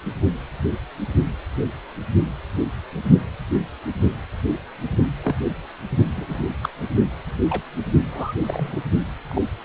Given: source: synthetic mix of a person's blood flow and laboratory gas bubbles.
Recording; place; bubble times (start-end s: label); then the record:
Doppler ultrasound of blood flow; precordium
5.24-5.36 s: bubbles
5.49-5.54 s: bubbles
6.15-6.46 s: bubbles
6.62-6.69 s: bubbles
7.50-7.62 s: bubbles
8.12-8.34 s: bubbles
8.38-8.82 s: bubbles
9.29-9.42 s: bubbles
From the record:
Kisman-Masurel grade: 121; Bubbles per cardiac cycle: 1 to 2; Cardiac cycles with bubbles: 10 to 50%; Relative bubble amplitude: barely perceptible (0.100 to 0.250); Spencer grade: 2 (many but less than half of the cardiac periods contain bubble signals, singularly or in groups); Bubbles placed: only in the low amplitude regions of the cardiac cycle